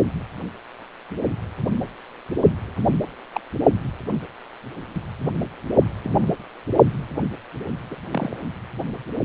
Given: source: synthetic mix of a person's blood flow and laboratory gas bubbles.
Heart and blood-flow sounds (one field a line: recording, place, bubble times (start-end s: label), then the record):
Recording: Doppler ultrasound of blood flow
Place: precordium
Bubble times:
3.33-3.40 s: bubbles
6.03-6.28 s: bubbles
7.91-7.96 s: bubbles
8.11-8.37 s: bubbles
From the record:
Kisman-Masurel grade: 121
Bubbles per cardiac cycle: 1 to 2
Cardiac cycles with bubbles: 10 to 50%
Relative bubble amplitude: barely perceptible (0.100 to 0.250)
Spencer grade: 2 (many but less than half of the cardiac periods contain bubble signals, singularly or in groups)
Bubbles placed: only in the low amplitude regions of the cardiac cycle